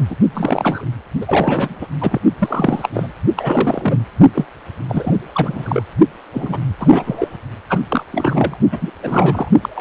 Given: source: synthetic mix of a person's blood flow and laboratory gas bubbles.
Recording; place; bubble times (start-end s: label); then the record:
Doppler ultrasound of blood flow; precordium
0.00-0.04 s: bubbles
0.09-0.15 s: bubbles
0.33-0.85 s: bubbles
1.21-1.87 s: bubbles
2.00-2.19 s: bubbles
2.39-2.89 s: bubbles
2.93-3.12 s: bubbles
3.37-3.99 s: bubbles
4.34-4.44 s: bubbles
4.88-5.17 s: bubbles
5.33-5.82 s: bubbles
6.33-6.57 s: bubbles
6.80-7.37 s: bubbles
7.69-7.79 s: bubbles
7.88-8.04 s: bubbles
8.12-8.58 s: bubbles
8.71-8.91 s: bubbles
9.03-9.49 s: bubbles
9.62-9.69 s: bubbles
9.75-9.81 s: bubbles
From the record:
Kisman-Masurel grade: 343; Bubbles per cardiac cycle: rolling drumbeat, 9 or more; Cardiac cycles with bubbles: 100%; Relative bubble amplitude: loud (0.450 to 0.775); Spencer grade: 3 (all of the cardiac periods contain showers or single bubble signals, but not dominating or overriding the cardiac motion signals); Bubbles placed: only in the low amplitude regions of the cardiac cycle